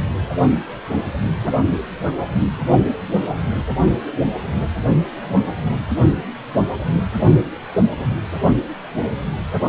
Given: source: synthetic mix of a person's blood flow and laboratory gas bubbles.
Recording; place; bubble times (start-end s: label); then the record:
Doppler ultrasound of blood flow; precordium
no bubbles
From the record:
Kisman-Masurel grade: 000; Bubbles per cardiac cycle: 0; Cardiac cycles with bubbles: 0%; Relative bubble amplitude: no bubbles discernible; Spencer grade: 0 (complete lack of bubble signals)